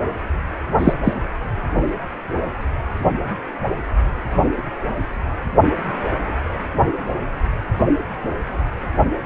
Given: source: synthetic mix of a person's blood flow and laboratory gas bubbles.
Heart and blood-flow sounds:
Doppler ultrasound of blood flow; precordium
0.79-0.93 s: bubbles
1.04-1.13 s: bubbles
From the record:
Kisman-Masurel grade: 113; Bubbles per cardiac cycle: 1 to 2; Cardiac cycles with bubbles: 1 to 10%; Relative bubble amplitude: loud (0.450 to 0.775); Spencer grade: 1 (occasional bubble signal discernible with the cardiac motion signal, with majority of cardiac periods free of bubbles); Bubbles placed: anywhere in the cardiac cycle

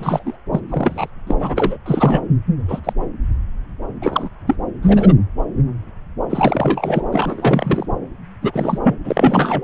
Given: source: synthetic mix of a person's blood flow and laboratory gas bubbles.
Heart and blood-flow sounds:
Doppler ultrasound of blood flow; subclavian vein
0.00-0.36 s: bubbles
0.52-0.60 s: bubbles
0.68-1.10 s: bubbles
1.26-1.35 s: bubbles
1.39-1.77 s: bubbles
1.85-2.22 s: bubbles
2.68-2.80 s: bubbles
2.83-2.93 s: bubbles
4.02-4.29 s: bubbles
4.46-4.56 s: bubbles
4.82-5.13 s: bubbles
6.29-7.03 s: bubbles
7.12-7.86 s: bubbles
8.42-8.79 s: bubbles
8.83-8.96 s: bubbles
9.04-9.64 s: bubbles
From the record:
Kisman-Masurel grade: 233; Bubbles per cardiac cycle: several, 3 to 8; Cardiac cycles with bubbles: 50 to 99%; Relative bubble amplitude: loud (0.450 to 0.775); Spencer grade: 3 (all of the cardiac periods contain showers or single bubble signals, but not dominating or overriding the cardiac motion signals); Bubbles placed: anywhere in the cardiac cycle

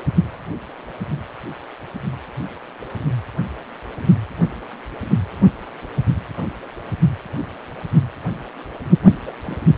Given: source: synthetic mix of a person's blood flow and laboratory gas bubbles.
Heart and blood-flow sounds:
Doppler ultrasound of blood flow; precordium
9.26-9.30 s: bubbles
9.44-9.68 s: bubbles
From the record:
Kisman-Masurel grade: 211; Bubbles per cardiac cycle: several, 3 to 8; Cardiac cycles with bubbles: 1 to 10%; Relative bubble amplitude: barely perceptible (0.100 to 0.250); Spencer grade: 1 (occasional bubble signal discernible with the cardiac motion signal, with majority of cardiac periods free of bubbles); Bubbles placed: anywhere in the cardiac cycle

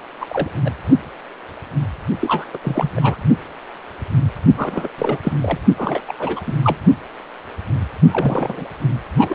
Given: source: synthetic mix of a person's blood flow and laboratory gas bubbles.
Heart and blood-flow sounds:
Doppler ultrasound of blood flow; precordium
0.21-0.26 s: bubbles
0.31-0.49 s: bubbles
0.64-0.71 s: bubbles
2.19-2.45 s: bubbles
2.53-2.58 s: bubbles
2.62-2.91 s: bubbles
2.95-3.17 s: bubbles
4.58-4.88 s: bubbles
4.98-5.17 s: bubbles
5.23-5.33 s: bubbles
5.41-5.58 s: bubbles
5.78-6.01 s: bubbles
6.08-6.13 s: bubbles
6.18-6.54 s: bubbles
6.63-6.77 s: bubbles
8.12-8.66 s: bubbles
9.18-9.35 s: bubbles
From the record:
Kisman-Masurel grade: 332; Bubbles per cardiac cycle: rolling drumbeat, 9 or more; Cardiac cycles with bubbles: 50 to 99%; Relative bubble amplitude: moderate (0.250 to 0.450); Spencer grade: 3 (all of the cardiac periods contain showers or single bubble signals, but not dominating or overriding the cardiac motion signals); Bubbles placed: only in the low amplitude regions of the cardiac cycle

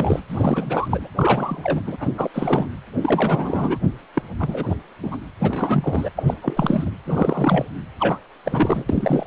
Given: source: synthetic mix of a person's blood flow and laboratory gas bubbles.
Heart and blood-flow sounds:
Doppler ultrasound of blood flow; precordium
0.00-0.20 s: bubbles
0.29-1.07 s: bubbles
1.17-1.80 s: bubbles
1.87-1.97 s: bubbles
2.00-2.08 s: bubbles
2.17-2.30 s: bubbles
2.34-2.66 s: bubbles
3.02-3.79 s: bubbles
4.14-4.22 s: bubbles
4.40-4.75 s: bubbles
5.02-5.17 s: bubbles
5.39-6.10 s: bubbles
6.17-6.23 s: bubbles
6.27-6.34 s: bubbles
6.42-6.91 s: bubbles
7.07-7.66 s: bubbles
8.00-8.18 s: bubbles
8.45-8.85 s: bubbles
8.89-9.27 s: bubbles
From the record:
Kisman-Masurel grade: 342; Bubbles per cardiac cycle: rolling drumbeat, 9 or more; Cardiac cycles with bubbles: 100%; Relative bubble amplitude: moderate (0.250 to 0.450); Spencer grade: 3 (all of the cardiac periods contain showers or single bubble signals, but not dominating or overriding the cardiac motion signals); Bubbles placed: anywhere in the cardiac cycle

